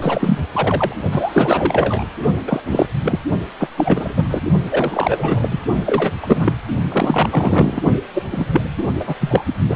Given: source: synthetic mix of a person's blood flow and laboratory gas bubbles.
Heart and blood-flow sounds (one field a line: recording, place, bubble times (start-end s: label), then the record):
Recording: Doppler ultrasound of blood flow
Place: precordium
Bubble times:
0.01-0.37 s: bubbles
0.52-0.95 s: bubbles
1.11-2.04 s: bubbles
2.47-2.60 s: bubbles
2.67-2.86 s: bubbles
3.03-3.19 s: bubbles
3.59-3.67 s: bubbles
3.76-4.28 s: bubbles
4.30-4.41 s: bubbles
4.69-5.59 s: bubbles
5.86-6.12 s: bubbles
6.22-6.52 s: bubbles
6.90-7.82 s: bubbles
8.14-8.23 s: bubbles
8.31-8.46 s: bubbles
8.53-8.62 s: bubbles
8.77-8.84 s: bubbles
9.00-9.15 s: bubbles
9.20-9.45 s: bubbles
9.69-9.76 s: bubbles
From the record:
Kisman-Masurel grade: 343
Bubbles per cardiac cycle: rolling drumbeat, 9 or more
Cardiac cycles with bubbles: 100%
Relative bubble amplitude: loud (0.450 to 0.775)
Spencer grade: 3 (all of the cardiac periods contain showers or single bubble signals, but not dominating or overriding the cardiac motion signals)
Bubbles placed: only in the low amplitude regions of the cardiac cycle